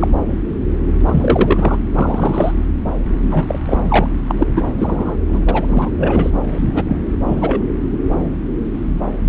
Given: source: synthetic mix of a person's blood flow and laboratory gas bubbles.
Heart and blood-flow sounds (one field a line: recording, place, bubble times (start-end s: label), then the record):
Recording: Doppler ultrasound of blood flow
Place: subclavian vein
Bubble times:
0.00-0.08 s: bubbles
1.05-1.79 s: bubbles
1.94-2.52 s: bubbles
3.18-3.58 s: bubbles
3.67-4.07 s: bubbles
4.29-4.34 s: bubbles
4.38-4.47 s: bubbles
4.51-4.62 s: bubbles
4.78-5.17 s: bubbles
5.29-5.91 s: bubbles
5.97-6.30 s: bubbles
6.51-7.02 s: bubbles
7.26-7.63 s: bubbles
From the record:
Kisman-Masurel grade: 233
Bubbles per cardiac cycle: several, 3 to 8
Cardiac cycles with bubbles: 50 to 99%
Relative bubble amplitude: loud (0.450 to 0.775)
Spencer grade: 3 (all of the cardiac periods contain showers or single bubble signals, but not dominating or overriding the cardiac motion signals)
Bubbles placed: anywhere in the cardiac cycle